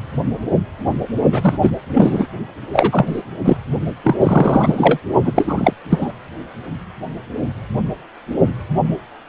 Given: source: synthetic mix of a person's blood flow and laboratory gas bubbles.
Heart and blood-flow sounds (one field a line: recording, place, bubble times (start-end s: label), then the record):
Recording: Doppler ultrasound of blood flow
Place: precordium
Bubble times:
1.31-1.58 s: bubbles
1.60-1.71 s: bubbles
1.93-2.27 s: bubbles
2.73-3.21 s: bubbles
3.44-3.57 s: bubbles
4.04-4.16 s: bubbles
4.21-5.00 s: bubbles
5.24-5.73 s: bubbles
5.90-6.12 s: bubbles
From the record:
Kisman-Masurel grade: 333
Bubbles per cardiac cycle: rolling drumbeat, 9 or more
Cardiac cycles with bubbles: 50 to 99%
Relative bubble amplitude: loud (0.450 to 0.775)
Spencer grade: 3 (all of the cardiac periods contain showers or single bubble signals, but not dominating or overriding the cardiac motion signals)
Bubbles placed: only in the low amplitude regions of the cardiac cycle